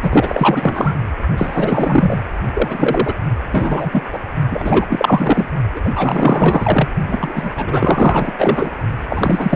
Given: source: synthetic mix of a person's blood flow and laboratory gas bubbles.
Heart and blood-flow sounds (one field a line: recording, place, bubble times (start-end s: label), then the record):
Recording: Doppler ultrasound of blood flow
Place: precordium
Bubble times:
0.03-0.98 s: bubbles
1.37-2.18 s: bubbles
2.53-3.13 s: bubbles
3.52-4.03 s: bubbles
4.12-4.20 s: bubbles
4.51-4.85 s: bubbles
4.88-5.50 s: bubbles
5.75-5.81 s: bubbles
5.84-5.90 s: bubbles
5.95-6.88 s: bubbles
7.08-7.51 s: bubbles
7.55-8.32 s: bubbles
8.38-8.70 s: bubbles
9.09-9.56 s: bubbles
From the record:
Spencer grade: 4 (maximum detectable bubble signal sounding continuously throughout systole and diastole of every cardiac period, and overriding the amplitude of the normal cardiac signals)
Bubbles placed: only in the low amplitude regions of the cardiac cycle